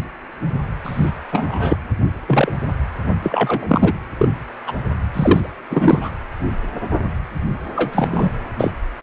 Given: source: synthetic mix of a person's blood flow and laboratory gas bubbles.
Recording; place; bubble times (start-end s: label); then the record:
Doppler ultrasound of blood flow; precordium
0.83-1.11 s: bubbles
1.32-1.77 s: bubbles
2.27-2.52 s: bubbles
3.22-3.92 s: bubbles
4.20-4.29 s: bubbles
4.67-4.72 s: bubbles
5.13-5.53 s: bubbles
5.70-6.12 s: bubbles
7.74-8.31 s: bubbles
8.59-8.72 s: bubbles
From the record:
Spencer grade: 3 (all of the cardiac periods contain showers or single bubble signals, but not dominating or overriding the cardiac motion signals); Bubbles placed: anywhere in the cardiac cycle